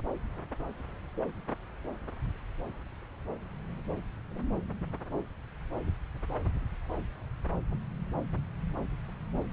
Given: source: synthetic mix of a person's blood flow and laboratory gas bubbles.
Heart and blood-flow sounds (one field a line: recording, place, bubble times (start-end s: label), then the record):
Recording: Doppler ultrasound of blood flow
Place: subclavian vein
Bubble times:
no bubbles
From the record:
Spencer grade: 0 (complete lack of bubble signals)